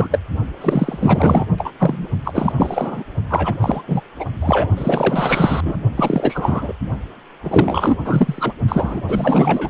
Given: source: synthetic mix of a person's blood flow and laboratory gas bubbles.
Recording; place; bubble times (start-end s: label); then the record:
Doppler ultrasound of blood flow; precordium
0.00-0.08 s: bubbles
0.11-0.18 s: bubbles
0.61-1.46 s: bubbles
1.58-1.73 s: bubbles
1.79-2.08 s: bubbles
2.24-2.52 s: bubbles
2.57-3.03 s: bubbles
3.29-3.54 s: bubbles
3.61-3.83 s: bubbles
3.88-4.01 s: bubbles
4.18-4.25 s: bubbles
4.42-4.69 s: bubbles
4.76-5.76 s: bubbles
5.96-6.73 s: bubbles
7.43-7.96 s: bubbles
8.04-8.53 s: bubbles
8.68-9.02 s: bubbles
9.08-9.70 s: bubbles
From the record:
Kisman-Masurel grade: 444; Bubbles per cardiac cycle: continuous sound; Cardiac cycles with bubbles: 100%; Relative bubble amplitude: maximal (0.775 to 0.999); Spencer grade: 4 (maximum detectable bubble signal sounding continuously throughout systole and diastole of every cardiac period, and overriding the amplitude of the normal cardiac signals); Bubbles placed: only in the low amplitude regions of the cardiac cycle